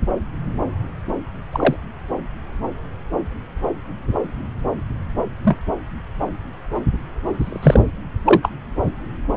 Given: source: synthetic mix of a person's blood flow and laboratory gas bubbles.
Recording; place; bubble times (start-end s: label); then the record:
Doppler ultrasound of blood flow; subclavian vein
1.52-1.76 s: bubbles
5.43-5.58 s: bubbles
7.39-7.81 s: bubbles
8.25-8.50 s: bubbles
From the record:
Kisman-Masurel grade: 123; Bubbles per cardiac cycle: 1 to 2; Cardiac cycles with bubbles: 10 to 50%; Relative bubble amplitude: loud (0.450 to 0.775); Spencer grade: 2 (many but less than half of the cardiac periods contain bubble signals, singularly or in groups); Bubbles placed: anywhere in the cardiac cycle